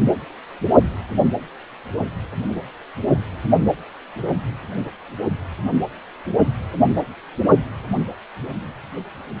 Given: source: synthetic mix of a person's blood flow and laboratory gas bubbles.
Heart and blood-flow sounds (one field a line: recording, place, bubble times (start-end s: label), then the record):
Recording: Doppler ultrasound of blood flow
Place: precordium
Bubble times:
no bubbles
From the record:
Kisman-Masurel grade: 000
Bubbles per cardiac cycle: 0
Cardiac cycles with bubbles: 0%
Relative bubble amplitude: no bubbles discernible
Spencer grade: 0 (complete lack of bubble signals)